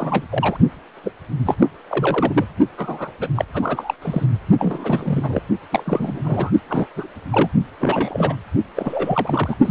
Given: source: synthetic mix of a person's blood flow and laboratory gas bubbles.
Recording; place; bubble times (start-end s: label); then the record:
Doppler ultrasound of blood flow; precordium
0.00-0.25 s: bubbles
0.30-0.57 s: bubbles
1.04-1.11 s: bubbles
1.45-1.55 s: bubbles
1.59-1.68 s: bubbles
1.89-2.45 s: bubbles
2.77-3.11 s: bubbles
3.20-3.28 s: bubbles
3.35-3.45 s: bubbles
3.54-3.94 s: bubbles
4.01-4.26 s: bubbles
4.59-5.42 s: bubbles
5.71-6.51 s: bubbles
6.69-6.88 s: bubbles
6.96-7.07 s: bubbles
7.32-7.49 s: bubbles
7.79-8.35 s: bubbles
8.76-9.56 s: bubbles
9.64-9.71 s: bubbles
From the record:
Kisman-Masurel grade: 332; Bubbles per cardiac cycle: rolling drumbeat, 9 or more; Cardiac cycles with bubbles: 50 to 99%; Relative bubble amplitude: moderate (0.250 to 0.450); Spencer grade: 3 (all of the cardiac periods contain showers or single bubble signals, but not dominating or overriding the cardiac motion signals); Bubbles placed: only in the low amplitude regions of the cardiac cycle